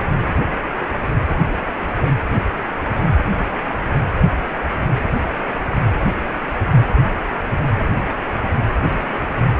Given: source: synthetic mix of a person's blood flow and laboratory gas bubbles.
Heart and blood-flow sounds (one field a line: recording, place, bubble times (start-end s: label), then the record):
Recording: Doppler ultrasound of blood flow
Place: precordium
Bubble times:
8.89-9.39 s: bubbles
From the record:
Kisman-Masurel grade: 111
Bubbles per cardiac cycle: 1 to 2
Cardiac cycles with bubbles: 1 to 10%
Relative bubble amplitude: barely perceptible (0.100 to 0.250)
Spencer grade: 1 (occasional bubble signal discernible with the cardiac motion signal, with majority of cardiac periods free of bubbles)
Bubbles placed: anywhere in the cardiac cycle